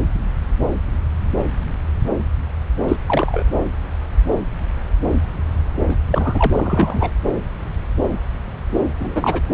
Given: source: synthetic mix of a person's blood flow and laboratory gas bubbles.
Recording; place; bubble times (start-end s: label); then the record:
Doppler ultrasound of blood flow; subclavian vein
2.88-2.96 s: bubbles
3.06-3.44 s: bubbles
5.89-5.96 s: bubbles
6.10-7.11 s: bubbles
8.99-9.42 s: bubbles
From the record:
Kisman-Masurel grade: 222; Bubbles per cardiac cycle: several, 3 to 8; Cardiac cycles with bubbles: 10 to 50%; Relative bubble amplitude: moderate (0.250 to 0.450); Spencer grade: 2 (many but less than half of the cardiac periods contain bubble signals, singularly or in groups); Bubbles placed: anywhere in the cardiac cycle